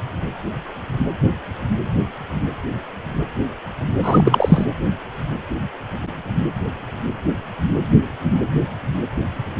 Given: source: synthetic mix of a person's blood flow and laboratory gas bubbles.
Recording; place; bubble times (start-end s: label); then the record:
Doppler ultrasound of blood flow; precordium
4.02-4.64 s: bubbles
From the record:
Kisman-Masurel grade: 213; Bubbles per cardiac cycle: several, 3 to 8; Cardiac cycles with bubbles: 1 to 10%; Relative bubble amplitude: loud (0.450 to 0.775); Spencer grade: 1 (occasional bubble signal discernible with the cardiac motion signal, with majority of cardiac periods free of bubbles); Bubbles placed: anywhere in the cardiac cycle